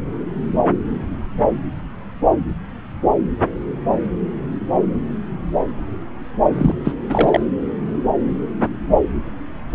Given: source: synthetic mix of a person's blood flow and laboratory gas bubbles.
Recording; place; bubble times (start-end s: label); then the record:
Doppler ultrasound of blood flow; subclavian vein
6.52-6.74 s: bubbles
6.84-6.92 s: bubbles
7.09-7.40 s: bubbles
From the record:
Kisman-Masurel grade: 213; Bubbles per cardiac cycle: several, 3 to 8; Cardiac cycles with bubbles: 1 to 10%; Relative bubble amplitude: loud (0.450 to 0.775); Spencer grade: 1 (occasional bubble signal discernible with the cardiac motion signal, with majority of cardiac periods free of bubbles); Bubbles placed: anywhere in the cardiac cycle